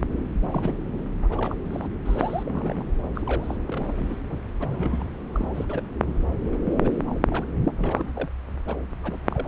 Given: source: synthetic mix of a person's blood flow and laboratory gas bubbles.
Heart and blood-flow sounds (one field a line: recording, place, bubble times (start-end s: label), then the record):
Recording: Doppler ultrasound of blood flow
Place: subclavian vein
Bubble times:
0.41-0.75 s: bubbles
0.92-1.03 s: bubbles
1.22-1.57 s: bubbles
1.64-1.88 s: bubbles
2.06-2.86 s: bubbles
3.14-3.57 s: bubbles
3.65-4.18 s: bubbles
4.29-4.37 s: bubbles
4.58-5.06 s: bubbles
5.33-5.83 s: bubbles
6.06-6.12 s: bubbles
6.15-6.24 s: bubbles
6.51-6.58 s: bubbles
6.65-7.19 s: bubbles
7.28-7.46 s: bubbles
7.64-8.29 s: bubbles
8.66-8.78 s: bubbles
9.03-9.17 s: bubbles
9.30-9.48 s: bubbles
From the record:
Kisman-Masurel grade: 342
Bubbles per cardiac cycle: rolling drumbeat, 9 or more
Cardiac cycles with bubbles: 100%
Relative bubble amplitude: moderate (0.250 to 0.450)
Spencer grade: 3 (all of the cardiac periods contain showers or single bubble signals, but not dominating or overriding the cardiac motion signals)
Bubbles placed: anywhere in the cardiac cycle